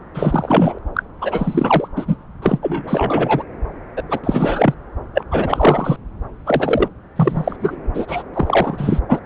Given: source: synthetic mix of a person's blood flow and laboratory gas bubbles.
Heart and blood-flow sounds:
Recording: Doppler ultrasound of blood flow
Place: subclavian vein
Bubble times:
0.14-0.79 s: bubbles
0.94-1.03 s: bubbles
1.21-1.88 s: bubbles
1.96-2.16 s: bubbles
2.42-2.58 s: bubbles
2.62-3.43 s: bubbles
3.97-4.03 s: bubbles
4.09-4.20 s: bubbles
4.23-4.74 s: bubbles
5.14-5.23 s: bubbles
5.31-5.96 s: bubbles
6.46-6.88 s: bubbles
7.16-7.56 s: bubbles
7.60-7.76 s: bubbles
7.94-8.22 s: bubbles
8.34-9.00 s: bubbles
9.08-9.21 s: bubbles
From the record:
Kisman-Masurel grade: 333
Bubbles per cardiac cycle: rolling drumbeat, 9 or more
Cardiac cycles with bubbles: 50 to 99%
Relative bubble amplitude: loud (0.450 to 0.775)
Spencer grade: 3 (all of the cardiac periods contain showers or single bubble signals, but not dominating or overriding the cardiac motion signals)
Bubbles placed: anywhere in the cardiac cycle

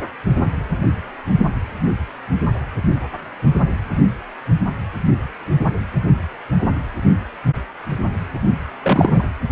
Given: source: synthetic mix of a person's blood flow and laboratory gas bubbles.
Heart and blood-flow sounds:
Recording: Doppler ultrasound of blood flow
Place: precordium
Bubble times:
8.81-9.24 s: bubbles
From the record:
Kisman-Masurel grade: 213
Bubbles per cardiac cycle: several, 3 to 8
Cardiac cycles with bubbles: 1 to 10%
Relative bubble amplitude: loud (0.450 to 0.775)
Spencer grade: 1 (occasional bubble signal discernible with the cardiac motion signal, with majority of cardiac periods free of bubbles)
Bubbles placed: anywhere in the cardiac cycle

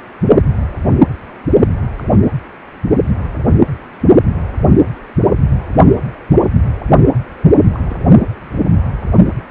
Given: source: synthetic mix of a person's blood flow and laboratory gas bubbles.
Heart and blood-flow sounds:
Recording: Doppler ultrasound of blood flow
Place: precordium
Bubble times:
1.97-2.04 s: bubbles
7.75-7.79 s: bubbles
7.86-7.97 s: bubbles
From the record:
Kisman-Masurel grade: 121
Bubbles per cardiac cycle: 1 to 2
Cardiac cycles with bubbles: 10 to 50%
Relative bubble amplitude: barely perceptible (0.100 to 0.250)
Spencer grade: 2 (many but less than half of the cardiac periods contain bubble signals, singularly or in groups)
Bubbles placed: only in the low amplitude regions of the cardiac cycle

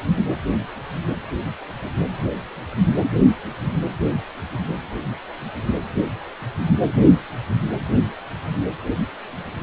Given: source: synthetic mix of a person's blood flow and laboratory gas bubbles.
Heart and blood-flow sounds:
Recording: Doppler ultrasound of blood flow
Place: precordium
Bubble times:
no bubbles
From the record:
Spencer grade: 0 (complete lack of bubble signals)

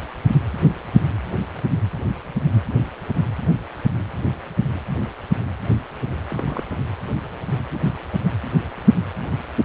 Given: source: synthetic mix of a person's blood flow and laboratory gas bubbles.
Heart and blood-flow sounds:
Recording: Doppler ultrasound of blood flow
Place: precordium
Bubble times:
6.27-6.63 s: bubbles
From the record:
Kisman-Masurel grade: 111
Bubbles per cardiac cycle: 1 to 2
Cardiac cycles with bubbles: 1 to 10%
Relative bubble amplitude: barely perceptible (0.100 to 0.250)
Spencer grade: 1 (occasional bubble signal discernible with the cardiac motion signal, with majority of cardiac periods free of bubbles)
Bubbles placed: anywhere in the cardiac cycle

